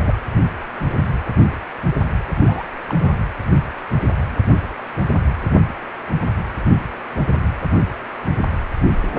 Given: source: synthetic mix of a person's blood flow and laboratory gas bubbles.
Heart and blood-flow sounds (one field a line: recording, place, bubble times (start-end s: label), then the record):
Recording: Doppler ultrasound of blood flow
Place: precordium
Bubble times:
0.00-0.15 s: bubbles
2.33-2.67 s: bubbles
2.89-2.94 s: bubbles
2.98-3.12 s: bubbles
From the record:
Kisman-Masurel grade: 221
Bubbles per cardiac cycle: several, 3 to 8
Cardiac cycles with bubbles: 10 to 50%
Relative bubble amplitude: barely perceptible (0.100 to 0.250)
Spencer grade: 2 (many but less than half of the cardiac periods contain bubble signals, singularly or in groups)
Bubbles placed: anywhere in the cardiac cycle